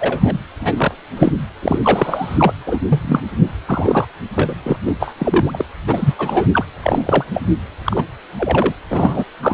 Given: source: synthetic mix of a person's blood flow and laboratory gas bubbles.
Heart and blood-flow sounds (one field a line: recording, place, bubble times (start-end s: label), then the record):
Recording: Doppler ultrasound of blood flow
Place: precordium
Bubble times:
0.00-0.38 s: bubbles
0.60-0.73 s: bubbles
0.77-0.94 s: bubbles
1.17-1.32 s: bubbles
1.62-1.78 s: bubbles
1.83-2.53 s: bubbles
2.66-2.79 s: bubbles
2.88-3.00 s: bubbles
3.04-3.23 s: bubbles
3.65-4.05 s: bubbles
4.35-4.54 s: bubbles
4.62-4.76 s: bubbles
4.85-4.93 s: bubbles
5.00-5.14 s: bubbles
5.18-5.65 s: bubbles
5.87-6.14 s: bubbles
6.18-6.47 s: bubbles
6.51-6.64 s: bubbles
6.82-7.25 s: bubbles
7.34-7.43 s: bubbles
7.84-8.05 s: bubbles
8.38-8.74 s: bubbles
8.90-9.24 s: bubbles
9.42-9.54 s: bubbles
From the record:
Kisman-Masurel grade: 243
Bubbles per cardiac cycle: several, 3 to 8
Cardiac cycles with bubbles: 100%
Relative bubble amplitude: loud (0.450 to 0.775)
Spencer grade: 3 (all of the cardiac periods contain showers or single bubble signals, but not dominating or overriding the cardiac motion signals)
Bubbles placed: anywhere in the cardiac cycle